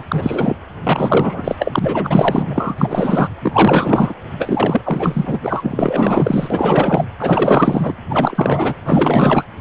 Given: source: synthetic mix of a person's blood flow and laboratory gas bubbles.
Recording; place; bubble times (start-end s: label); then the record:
Doppler ultrasound of blood flow; precordium
0.00-0.04 s: bubbles
0.08-0.56 s: bubbles
0.83-1.55 s: bubbles
1.58-3.29 s: bubbles
3.42-4.14 s: bubbles
4.38-4.81 s: bubbles
4.85-5.38 s: bubbles
5.42-7.05 s: bubbles
7.19-7.96 s: bubbles
8.09-8.74 s: bubbles
8.84-9.45 s: bubbles
From the record:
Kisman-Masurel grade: 444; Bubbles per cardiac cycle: continuous sound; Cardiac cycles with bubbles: 100%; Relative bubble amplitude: maximal (0.775 to 0.999); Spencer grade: 4 (maximum detectable bubble signal sounding continuously throughout systole and diastole of every cardiac period, and overriding the amplitude of the normal cardiac signals); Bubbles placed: anywhere in the cardiac cycle